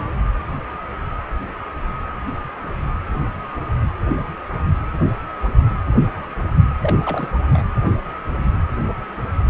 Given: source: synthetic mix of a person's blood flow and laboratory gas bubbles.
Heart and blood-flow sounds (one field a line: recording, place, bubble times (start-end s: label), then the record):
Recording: Doppler ultrasound of blood flow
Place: precordium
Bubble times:
6.82-6.96 s: bubbles
7.03-7.29 s: bubbles
7.53-7.65 s: bubbles
From the record:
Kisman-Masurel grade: 211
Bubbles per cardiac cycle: several, 3 to 8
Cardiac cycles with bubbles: 1 to 10%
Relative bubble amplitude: barely perceptible (0.100 to 0.250)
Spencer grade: 1 (occasional bubble signal discernible with the cardiac motion signal, with majority of cardiac periods free of bubbles)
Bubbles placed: anywhere in the cardiac cycle